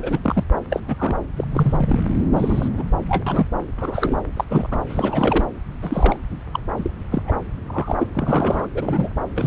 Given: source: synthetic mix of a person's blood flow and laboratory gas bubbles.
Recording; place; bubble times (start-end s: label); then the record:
Doppler ultrasound of blood flow; subclavian vein
0.02-0.19 s: bubbles
0.22-0.43 s: bubbles
0.70-0.80 s: bubbles
0.88-1.15 s: bubbles
1.36-1.45 s: bubbles
1.54-2.00 s: bubbles
2.36-2.68 s: bubbles
2.77-2.84 s: bubbles
3.08-3.24 s: bubbles
3.26-3.47 s: bubbles
3.77-4.22 s: bubbles
4.36-4.45 s: bubbles
4.50-4.80 s: bubbles
4.89-5.45 s: bubbles
5.83-6.16 s: bubbles
6.52-6.59 s: bubbles
6.77-6.92 s: bubbles
7.12-7.22 s: bubbles
7.25-7.32 s: bubbles
7.66-8.07 s: bubbles
8.13-8.67 s: bubbles
8.74-9.11 s: bubbles
9.36-9.47 s: bubbles
From the record:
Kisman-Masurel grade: 232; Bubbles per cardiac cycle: several, 3 to 8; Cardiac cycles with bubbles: 50 to 99%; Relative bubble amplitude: moderate (0.250 to 0.450); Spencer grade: 3 (all of the cardiac periods contain showers or single bubble signals, but not dominating or overriding the cardiac motion signals); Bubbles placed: anywhere in the cardiac cycle